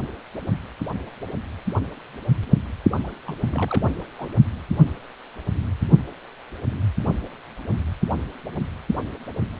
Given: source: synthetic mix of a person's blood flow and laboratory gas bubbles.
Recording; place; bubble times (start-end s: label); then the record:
Doppler ultrasound of blood flow; precordium
2.91-2.98 s: bubbles
3.04-3.11 s: bubbles
3.27-3.91 s: bubbles
4.18-4.30 s: bubbles
From the record:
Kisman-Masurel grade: 211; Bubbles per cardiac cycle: several, 3 to 8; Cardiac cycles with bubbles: 1 to 10%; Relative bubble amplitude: barely perceptible (0.100 to 0.250); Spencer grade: 1 (occasional bubble signal discernible with the cardiac motion signal, with majority of cardiac periods free of bubbles); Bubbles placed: only in the low amplitude regions of the cardiac cycle